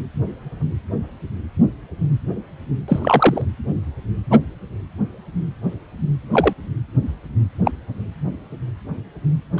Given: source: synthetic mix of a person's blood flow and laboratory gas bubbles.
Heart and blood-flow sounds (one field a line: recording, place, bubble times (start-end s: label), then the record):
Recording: Doppler ultrasound of blood flow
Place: precordium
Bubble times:
2.88-3.42 s: bubbles
4.31-4.38 s: bubbles
6.32-6.53 s: bubbles
7.65-7.72 s: bubbles
9.57-9.60 s: bubbles
From the record:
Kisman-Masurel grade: 123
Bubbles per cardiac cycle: 1 to 2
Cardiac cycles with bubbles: 10 to 50%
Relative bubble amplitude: loud (0.450 to 0.775)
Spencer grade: 2 (many but less than half of the cardiac periods contain bubble signals, singularly or in groups)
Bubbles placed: anywhere in the cardiac cycle